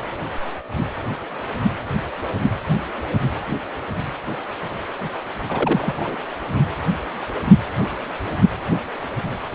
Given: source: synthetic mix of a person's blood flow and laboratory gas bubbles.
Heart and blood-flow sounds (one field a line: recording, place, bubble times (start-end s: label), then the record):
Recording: Doppler ultrasound of blood flow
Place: precordium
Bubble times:
5.48-6.17 s: bubbles
From the record:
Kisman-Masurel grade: 211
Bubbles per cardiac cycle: several, 3 to 8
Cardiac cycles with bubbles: 1 to 10%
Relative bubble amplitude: barely perceptible (0.100 to 0.250)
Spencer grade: 1 (occasional bubble signal discernible with the cardiac motion signal, with majority of cardiac periods free of bubbles)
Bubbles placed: anywhere in the cardiac cycle